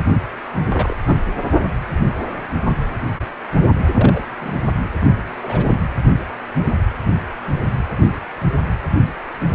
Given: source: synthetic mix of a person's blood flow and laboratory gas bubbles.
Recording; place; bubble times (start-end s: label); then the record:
Doppler ultrasound of blood flow; precordium
0.69-0.95 s: bubbles
1.06-1.16 s: bubbles
3.94-4.23 s: bubbles
4.41-4.51 s: bubbles
5.42-5.67 s: bubbles
From the record:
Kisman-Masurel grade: 122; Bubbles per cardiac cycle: 1 to 2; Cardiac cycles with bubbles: 10 to 50%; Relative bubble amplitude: moderate (0.250 to 0.450); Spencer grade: 2 (many but less than half of the cardiac periods contain bubble signals, singularly or in groups); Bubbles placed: only in the low amplitude regions of the cardiac cycle